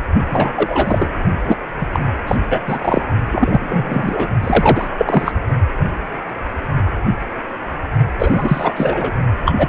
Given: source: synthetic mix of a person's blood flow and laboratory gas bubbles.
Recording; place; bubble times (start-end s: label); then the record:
Doppler ultrasound of blood flow; precordium
0.29-0.52 s: bubbles
0.56-1.07 s: bubbles
1.47-1.56 s: bubbles
1.81-1.90 s: bubbles
1.92-2.00 s: bubbles
2.27-2.37 s: bubbles
2.50-2.61 s: bubbles
2.67-2.79 s: bubbles
2.81-3.02 s: bubbles
3.31-4.27 s: bubbles
4.42-4.90 s: bubbles
4.98-5.33 s: bubbles
8.19-8.74 s: bubbles
8.76-9.14 s: bubbles
9.45-9.54 s: bubbles
9.58-9.68 s: bubbles
From the record:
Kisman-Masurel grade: 333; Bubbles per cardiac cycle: rolling drumbeat, 9 or more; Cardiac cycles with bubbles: 50 to 99%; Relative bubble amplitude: loud (0.450 to 0.775); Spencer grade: 3 (all of the cardiac periods contain showers or single bubble signals, but not dominating or overriding the cardiac motion signals); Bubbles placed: only in the low amplitude regions of the cardiac cycle